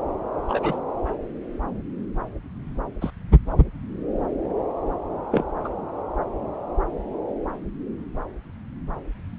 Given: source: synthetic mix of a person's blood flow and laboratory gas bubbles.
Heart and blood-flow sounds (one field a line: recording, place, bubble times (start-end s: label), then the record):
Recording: Doppler ultrasound of blood flow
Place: subclavian vein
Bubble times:
0.48-0.79 s: bubbles
3.01-3.10 s: bubbles
5.31-5.43 s: bubbles
5.63-5.68 s: bubbles
From the record:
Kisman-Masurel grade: 122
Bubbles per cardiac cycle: 1 to 2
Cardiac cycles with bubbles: 10 to 50%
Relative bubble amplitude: moderate (0.250 to 0.450)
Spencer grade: 2 (many but less than half of the cardiac periods contain bubble signals, singularly or in groups)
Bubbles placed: anywhere in the cardiac cycle